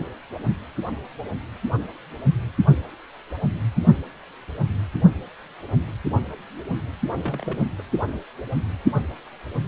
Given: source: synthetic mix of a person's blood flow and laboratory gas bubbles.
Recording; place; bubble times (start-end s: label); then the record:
Doppler ultrasound of blood flow; precordium
7.18-7.65 s: bubbles
7.79-7.82 s: bubbles
From the record:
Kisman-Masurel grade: 221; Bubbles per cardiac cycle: several, 3 to 8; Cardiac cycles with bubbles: 10 to 50%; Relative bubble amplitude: barely perceptible (0.100 to 0.250); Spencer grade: 2 (many but less than half of the cardiac periods contain bubble signals, singularly or in groups); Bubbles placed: anywhere in the cardiac cycle